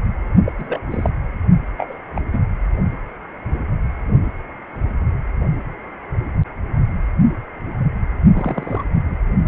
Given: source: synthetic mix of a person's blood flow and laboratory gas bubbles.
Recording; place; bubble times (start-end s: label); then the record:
Doppler ultrasound of blood flow; precordium
0.45-0.53 s: bubbles
0.58-0.80 s: bubbles
0.90-1.10 s: bubbles
1.77-1.97 s: bubbles
2.15-2.21 s: bubbles
2.32-2.41 s: bubbles
8.34-8.84 s: bubbles
8.95-9.17 s: bubbles
From the record:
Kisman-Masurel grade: 222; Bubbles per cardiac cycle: several, 3 to 8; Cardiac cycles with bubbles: 10 to 50%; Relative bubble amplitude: moderate (0.250 to 0.450); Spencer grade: 2 (many but less than half of the cardiac periods contain bubble signals, singularly or in groups); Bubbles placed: only in the low amplitude regions of the cardiac cycle